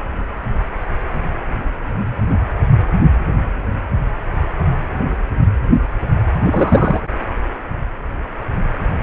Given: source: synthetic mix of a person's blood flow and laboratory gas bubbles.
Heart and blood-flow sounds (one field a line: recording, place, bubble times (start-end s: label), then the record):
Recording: Doppler ultrasound of blood flow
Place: precordium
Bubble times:
6.44-7.00 s: bubbles
From the record:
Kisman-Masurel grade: 213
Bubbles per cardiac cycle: several, 3 to 8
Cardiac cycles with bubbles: 1 to 10%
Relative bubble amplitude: loud (0.450 to 0.775)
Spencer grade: 1 (occasional bubble signal discernible with the cardiac motion signal, with majority of cardiac periods free of bubbles)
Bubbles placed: anywhere in the cardiac cycle